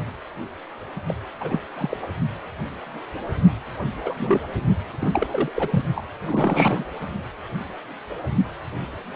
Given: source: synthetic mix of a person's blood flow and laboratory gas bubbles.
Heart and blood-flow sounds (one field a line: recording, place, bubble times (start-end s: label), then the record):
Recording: Doppler ultrasound of blood flow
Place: precordium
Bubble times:
1.08-1.14 s: bubbles
1.40-1.60 s: bubbles
1.77-1.97 s: bubbles
2.02-2.07 s: bubbles
4.04-4.14 s: bubbles
4.17-4.41 s: bubbles
5.00-5.27 s: bubbles
5.31-5.52 s: bubbles
5.55-5.85 s: bubbles
5.95-6.03 s: bubbles
6.25-6.84 s: bubbles
From the record:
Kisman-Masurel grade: 222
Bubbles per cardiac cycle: several, 3 to 8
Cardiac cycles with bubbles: 10 to 50%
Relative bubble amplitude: moderate (0.250 to 0.450)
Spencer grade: 2 (many but less than half of the cardiac periods contain bubble signals, singularly or in groups)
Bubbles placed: only in the low amplitude regions of the cardiac cycle